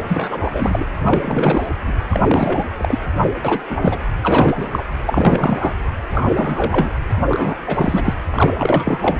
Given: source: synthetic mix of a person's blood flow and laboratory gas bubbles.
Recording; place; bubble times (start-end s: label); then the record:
Doppler ultrasound of blood flow; precordium
0.08-0.84 s: bubbles
1.03-1.67 s: bubbles
1.83-1.92 s: bubbles
2.10-2.20 s: bubbles
2.27-2.67 s: bubbles
2.77-2.99 s: bubbles
3.44-3.60 s: bubbles
3.69-3.78 s: bubbles
3.81-3.98 s: bubbles
4.22-4.66 s: bubbles
4.71-4.84 s: bubbles
5.06-5.73 s: bubbles
6.11-6.89 s: bubbles
7.29-7.55 s: bubbles
7.66-8.13 s: bubbles
8.30-9.20 s: bubbles
From the record:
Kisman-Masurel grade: 343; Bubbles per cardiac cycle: rolling drumbeat, 9 or more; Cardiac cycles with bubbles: 100%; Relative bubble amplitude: loud (0.450 to 0.775); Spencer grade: 3 (all of the cardiac periods contain showers or single bubble signals, but not dominating or overriding the cardiac motion signals); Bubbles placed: anywhere in the cardiac cycle